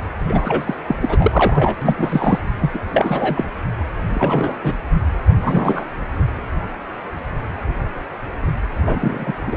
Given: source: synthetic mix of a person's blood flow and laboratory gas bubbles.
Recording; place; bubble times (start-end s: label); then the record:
Doppler ultrasound of blood flow; precordium
0.27-0.76 s: bubbles
0.86-0.96 s: bubbles
1.00-1.06 s: bubbles
1.08-1.75 s: bubbles
1.81-2.39 s: bubbles
2.62-2.71 s: bubbles
2.74-2.80 s: bubbles
2.92-3.45 s: bubbles
4.15-4.74 s: bubbles
5.42-5.85 s: bubbles
8.85-9.34 s: bubbles
9.46-9.57 s: bubbles
From the record:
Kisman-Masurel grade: 333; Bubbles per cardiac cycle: rolling drumbeat, 9 or more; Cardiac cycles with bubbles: 50 to 99%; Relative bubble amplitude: loud (0.450 to 0.775); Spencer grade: 3 (all of the cardiac periods contain showers or single bubble signals, but not dominating or overriding the cardiac motion signals); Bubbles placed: anywhere in the cardiac cycle